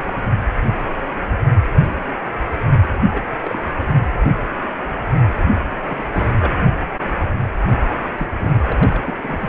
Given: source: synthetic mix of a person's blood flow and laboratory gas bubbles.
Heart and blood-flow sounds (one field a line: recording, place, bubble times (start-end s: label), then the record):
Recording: Doppler ultrasound of blood flow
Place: precordium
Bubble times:
0.08-0.17 s: bubbles
3.10-3.25 s: bubbles
3.32-3.71 s: bubbles
3.76-4.04 s: bubbles
5.88-6.03 s: bubbles
6.12-6.29 s: bubbles
6.38-6.51 s: bubbles
8.17-8.29 s: bubbles
8.38-8.53 s: bubbles
8.66-9.03 s: bubbles
9.07-9.14 s: bubbles
9.21-9.49 s: bubbles
From the record:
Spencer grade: 2 (many but less than half of the cardiac periods contain bubble signals, singularly or in groups)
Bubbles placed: only in the low amplitude regions of the cardiac cycle